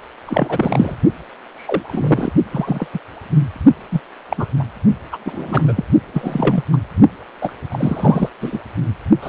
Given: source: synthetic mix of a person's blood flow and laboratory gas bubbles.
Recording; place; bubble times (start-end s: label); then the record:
Doppler ultrasound of blood flow; precordium
0.26-0.96 s: bubbles
1.56-2.31 s: bubbles
2.52-2.87 s: bubbles
2.92-2.99 s: bubbles
3.91-4.01 s: bubbles
4.29-4.45 s: bubbles
4.59-4.64 s: bubbles
5.11-5.17 s: bubbles
5.25-5.73 s: bubbles
5.75-5.84 s: bubbles
6.13-6.63 s: bubbles
6.72-6.77 s: bubbles
7.41-7.53 s: bubbles
7.70-8.29 s: bubbles
8.40-8.59 s: bubbles
9.22-9.29 s: bubbles
From the record:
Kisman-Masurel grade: 243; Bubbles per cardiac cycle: several, 3 to 8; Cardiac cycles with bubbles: 100%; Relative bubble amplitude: loud (0.450 to 0.775); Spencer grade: 3 (all of the cardiac periods contain showers or single bubble signals, but not dominating or overriding the cardiac motion signals); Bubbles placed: only in the low amplitude regions of the cardiac cycle